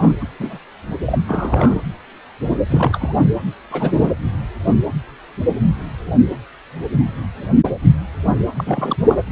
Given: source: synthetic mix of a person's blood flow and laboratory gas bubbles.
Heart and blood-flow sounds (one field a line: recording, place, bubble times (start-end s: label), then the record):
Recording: Doppler ultrasound of blood flow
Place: precordium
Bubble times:
0.00-0.12 s: bubbles
0.20-0.27 s: bubbles
0.39-0.59 s: bubbles
1.06-1.19 s: bubbles
1.28-1.81 s: bubbles
2.70-3.25 s: bubbles
3.71-4.13 s: bubbles
8.56-8.96 s: bubbles
9.07-9.21 s: bubbles
From the record:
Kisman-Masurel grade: 222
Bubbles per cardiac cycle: several, 3 to 8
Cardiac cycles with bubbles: 10 to 50%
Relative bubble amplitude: moderate (0.250 to 0.450)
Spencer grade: 2 (many but less than half of the cardiac periods contain bubble signals, singularly or in groups)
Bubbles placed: anywhere in the cardiac cycle